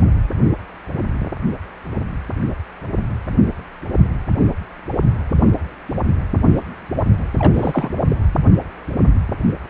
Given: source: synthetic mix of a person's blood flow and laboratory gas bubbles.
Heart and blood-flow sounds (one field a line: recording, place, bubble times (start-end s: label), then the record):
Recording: Doppler ultrasound of blood flow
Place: precordium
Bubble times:
7.39-8.01 s: bubbles
8.10-8.16 s: bubbles
From the record:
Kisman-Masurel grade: 212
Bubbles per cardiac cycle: several, 3 to 8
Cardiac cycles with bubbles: 1 to 10%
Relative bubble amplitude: moderate (0.250 to 0.450)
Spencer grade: 1 (occasional bubble signal discernible with the cardiac motion signal, with majority of cardiac periods free of bubbles)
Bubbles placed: anywhere in the cardiac cycle